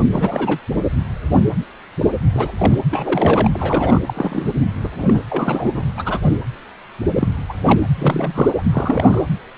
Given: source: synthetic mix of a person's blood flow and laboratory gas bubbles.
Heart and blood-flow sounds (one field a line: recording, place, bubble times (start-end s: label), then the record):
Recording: Doppler ultrasound of blood flow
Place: precordium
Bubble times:
0.11-0.59 s: bubbles
2.33-2.52 s: bubbles
2.58-2.77 s: bubbles
2.90-3.48 s: bubbles
3.54-3.99 s: bubbles
4.06-4.54 s: bubbles
4.83-4.89 s: bubbles
4.99-5.23 s: bubbles
5.29-5.83 s: bubbles
5.96-6.38 s: bubbles
7.15-7.28 s: bubbles
7.49-7.54 s: bubbles
7.64-7.79 s: bubbles
7.96-8.51 s: bubbles
8.57-8.62 s: bubbles
8.72-9.22 s: bubbles
From the record:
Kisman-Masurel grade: 232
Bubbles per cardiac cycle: several, 3 to 8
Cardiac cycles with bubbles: 50 to 99%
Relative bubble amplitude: moderate (0.250 to 0.450)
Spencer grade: 3 (all of the cardiac periods contain showers or single bubble signals, but not dominating or overriding the cardiac motion signals)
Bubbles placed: anywhere in the cardiac cycle